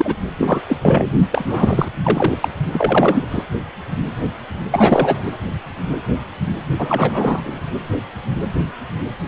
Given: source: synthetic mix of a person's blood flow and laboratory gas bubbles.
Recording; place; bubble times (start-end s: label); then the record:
Doppler ultrasound of blood flow; precordium
0.00-0.16 s: bubbles
0.38-0.60 s: bubbles
0.67-0.77 s: bubbles
0.81-1.05 s: bubbles
1.32-1.89 s: bubbles
2.03-2.38 s: bubbles
2.41-2.49 s: bubbles
2.71-3.26 s: bubbles
3.31-3.44 s: bubbles
4.71-5.29 s: bubbles
6.78-7.60 s: bubbles
From the record:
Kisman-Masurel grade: 333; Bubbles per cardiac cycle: rolling drumbeat, 9 or more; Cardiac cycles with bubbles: 50 to 99%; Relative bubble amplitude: loud (0.450 to 0.775); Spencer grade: 3 (all of the cardiac periods contain showers or single bubble signals, but not dominating or overriding the cardiac motion signals); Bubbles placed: only in the low amplitude regions of the cardiac cycle